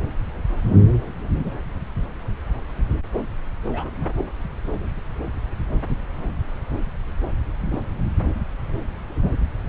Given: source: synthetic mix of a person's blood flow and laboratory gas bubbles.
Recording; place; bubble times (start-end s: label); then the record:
Doppler ultrasound of blood flow; subclavian vein
3.65-3.91 s: bubbles
4.17-4.25 s: bubbles
From the record:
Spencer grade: 1 (occasional bubble signal discernible with the cardiac motion signal, with majority of cardiac periods free of bubbles); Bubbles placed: anywhere in the cardiac cycle